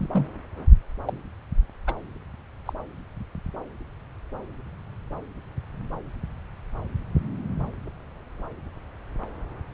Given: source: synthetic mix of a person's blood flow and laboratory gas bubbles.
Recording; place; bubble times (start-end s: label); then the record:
Doppler ultrasound of blood flow; subclavian vein
0.00-0.27 s: bubbles
1.07-1.18 s: bubbles
1.87-1.94 s: bubbles
2.66-2.73 s: bubbles
From the record:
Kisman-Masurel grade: 121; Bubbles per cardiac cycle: 1 to 2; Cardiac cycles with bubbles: 10 to 50%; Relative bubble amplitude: barely perceptible (0.100 to 0.250); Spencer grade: 2 (many but less than half of the cardiac periods contain bubble signals, singularly or in groups); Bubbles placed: anywhere in the cardiac cycle